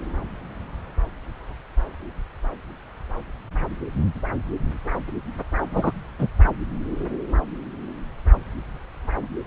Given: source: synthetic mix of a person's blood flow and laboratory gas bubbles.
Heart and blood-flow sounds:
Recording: Doppler ultrasound of blood flow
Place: subclavian vein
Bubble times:
5.73-5.91 s: bubbles
6.18-6.27 s: bubbles
From the record:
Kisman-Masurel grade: 113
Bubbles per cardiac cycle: 1 to 2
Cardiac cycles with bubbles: 1 to 10%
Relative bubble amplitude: loud (0.450 to 0.775)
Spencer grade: 1 (occasional bubble signal discernible with the cardiac motion signal, with majority of cardiac periods free of bubbles)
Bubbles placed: anywhere in the cardiac cycle

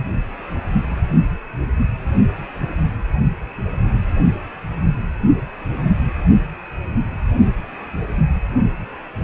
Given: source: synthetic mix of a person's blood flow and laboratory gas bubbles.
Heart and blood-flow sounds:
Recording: Doppler ultrasound of blood flow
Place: precordium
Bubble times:
no bubbles
From the record:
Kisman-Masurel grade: 000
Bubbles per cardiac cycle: 0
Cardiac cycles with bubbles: 0%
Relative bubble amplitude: no bubbles discernible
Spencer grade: 0 (complete lack of bubble signals)

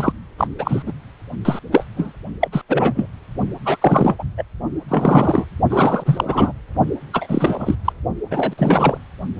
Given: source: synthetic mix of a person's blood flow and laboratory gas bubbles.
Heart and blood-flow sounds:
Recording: Doppler ultrasound of blood flow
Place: precordium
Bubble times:
0.00-0.12 s: bubbles
0.37-0.48 s: bubbles
0.58-0.83 s: bubbles
0.86-0.93 s: bubbles
1.45-1.59 s: bubbles
1.72-1.86 s: bubbles
1.96-2.13 s: bubbles
2.41-2.48 s: bubbles
2.52-2.62 s: bubbles
2.68-3.09 s: bubbles
3.65-3.77 s: bubbles
3.81-4.16 s: bubbles
4.18-4.23 s: bubbles
4.38-4.43 s: bubbles
4.88-5.47 s: bubbles
5.70-6.52 s: bubbles
7.13-7.75 s: bubbles
7.84-7.92 s: bubbles
8.30-8.54 s: bubbles
8.58-8.98 s: bubbles
From the record:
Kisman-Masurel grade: 343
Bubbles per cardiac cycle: rolling drumbeat, 9 or more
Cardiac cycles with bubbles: 100%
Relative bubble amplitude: loud (0.450 to 0.775)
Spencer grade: 3 (all of the cardiac periods contain showers or single bubble signals, but not dominating or overriding the cardiac motion signals)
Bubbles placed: only in the low amplitude regions of the cardiac cycle

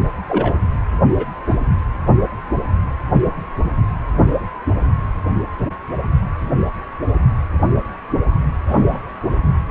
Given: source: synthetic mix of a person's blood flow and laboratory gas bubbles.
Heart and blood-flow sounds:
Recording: Doppler ultrasound of blood flow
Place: precordium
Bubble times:
0.27-0.55 s: bubbles
1.17-1.26 s: bubbles
1.46-1.59 s: bubbles
8.66-9.02 s: bubbles
From the record:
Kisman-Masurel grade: 122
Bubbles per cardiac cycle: 1 to 2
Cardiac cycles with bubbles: 10 to 50%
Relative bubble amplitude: moderate (0.250 to 0.450)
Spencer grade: 2 (many but less than half of the cardiac periods contain bubble signals, singularly or in groups)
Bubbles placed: anywhere in the cardiac cycle

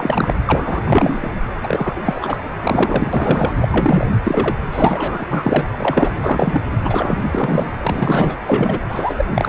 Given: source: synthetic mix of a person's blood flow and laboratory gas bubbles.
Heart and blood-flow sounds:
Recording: Doppler ultrasound of blood flow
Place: precordium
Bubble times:
0.00-0.34 s: bubbles
0.47-1.31 s: bubbles
1.63-2.01 s: bubbles
2.04-2.38 s: bubbles
2.56-3.53 s: bubbles
3.61-4.07 s: bubbles
4.24-4.56 s: bubbles
4.72-5.24 s: bubbles
5.30-5.65 s: bubbles
5.78-6.15 s: bubbles
6.23-6.61 s: bubbles
6.81-7.26 s: bubbles
7.32-7.73 s: bubbles
7.81-8.35 s: bubbles
8.46-8.80 s: bubbles
8.89-9.25 s: bubbles
9.34-9.49 s: bubbles
From the record:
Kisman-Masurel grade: 243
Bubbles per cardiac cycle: several, 3 to 8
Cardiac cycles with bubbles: 100%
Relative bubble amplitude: loud (0.450 to 0.775)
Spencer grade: 3 (all of the cardiac periods contain showers or single bubble signals, but not dominating or overriding the cardiac motion signals)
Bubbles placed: anywhere in the cardiac cycle

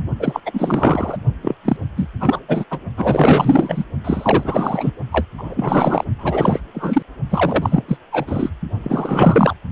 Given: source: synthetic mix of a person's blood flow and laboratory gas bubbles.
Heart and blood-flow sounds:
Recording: Doppler ultrasound of blood flow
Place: precordium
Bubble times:
0.19-0.40 s: bubbles
0.46-1.17 s: bubbles
1.42-1.55 s: bubbles
1.65-1.76 s: bubbles
1.97-2.07 s: bubbles
2.20-2.40 s: bubbles
2.48-2.65 s: bubbles
2.71-2.81 s: bubbles
2.97-3.85 s: bubbles
4.04-4.92 s: bubbles
5.12-5.26 s: bubbles
5.38-6.04 s: bubbles
6.19-6.61 s: bubbles
6.74-7.03 s: bubbles
7.30-7.84 s: bubbles
7.88-7.97 s: bubbles
8.12-8.50 s: bubbles
8.82-9.55 s: bubbles
From the record:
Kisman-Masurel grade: 444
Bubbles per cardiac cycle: continuous sound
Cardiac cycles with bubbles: 100%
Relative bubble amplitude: maximal (0.775 to 0.999)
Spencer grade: 4 (maximum detectable bubble signal sounding continuously throughout systole and diastole of every cardiac period, and overriding the amplitude of the normal cardiac signals)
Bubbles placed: only in the low amplitude regions of the cardiac cycle

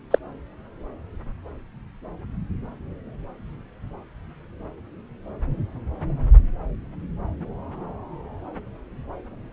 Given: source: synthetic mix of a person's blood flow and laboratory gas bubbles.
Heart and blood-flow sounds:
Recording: Doppler ultrasound of blood flow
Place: subclavian vein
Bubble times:
0.10-0.18 s: bubbles
From the record:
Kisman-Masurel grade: 213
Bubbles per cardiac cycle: several, 3 to 8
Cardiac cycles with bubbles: 1 to 10%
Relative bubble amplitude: loud (0.450 to 0.775)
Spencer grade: 1 (occasional bubble signal discernible with the cardiac motion signal, with majority of cardiac periods free of bubbles)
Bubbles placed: anywhere in the cardiac cycle

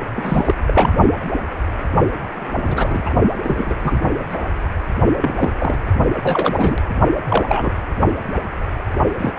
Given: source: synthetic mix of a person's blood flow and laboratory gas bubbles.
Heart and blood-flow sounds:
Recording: Doppler ultrasound of blood flow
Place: precordium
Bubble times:
0.14-0.54 s: bubbles
0.67-0.95 s: bubbles
2.34-3.13 s: bubbles
3.44-3.75 s: bubbles
3.83-3.99 s: bubbles
4.29-4.38 s: bubbles
5.22-5.54 s: bubbles
5.60-5.78 s: bubbles
6.23-6.75 s: bubbles
7.29-7.73 s: bubbles
9.18-9.33 s: bubbles
From the record:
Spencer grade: 3 (all of the cardiac periods contain showers or single bubble signals, but not dominating or overriding the cardiac motion signals)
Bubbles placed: only in the low amplitude regions of the cardiac cycle

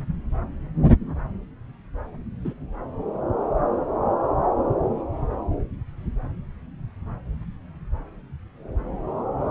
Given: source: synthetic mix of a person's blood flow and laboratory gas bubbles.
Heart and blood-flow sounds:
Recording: Doppler ultrasound of blood flow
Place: subclavian vein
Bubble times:
2.44-2.53 s: bubbles
From the record:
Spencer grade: 1 (occasional bubble signal discernible with the cardiac motion signal, with majority of cardiac periods free of bubbles)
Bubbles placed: anywhere in the cardiac cycle

